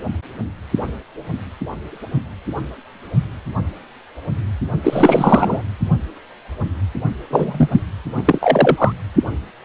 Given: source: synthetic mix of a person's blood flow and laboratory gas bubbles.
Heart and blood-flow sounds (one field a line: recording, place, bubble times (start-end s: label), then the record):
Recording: Doppler ultrasound of blood flow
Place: precordium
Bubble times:
4.83-5.62 s: bubbles
7.30-7.68 s: bubbles
7.71-7.80 s: bubbles
8.17-8.92 s: bubbles
From the record:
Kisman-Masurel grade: 223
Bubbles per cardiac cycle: several, 3 to 8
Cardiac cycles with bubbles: 10 to 50%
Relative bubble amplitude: loud (0.450 to 0.775)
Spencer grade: 2 (many but less than half of the cardiac periods contain bubble signals, singularly or in groups)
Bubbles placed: only in the low amplitude regions of the cardiac cycle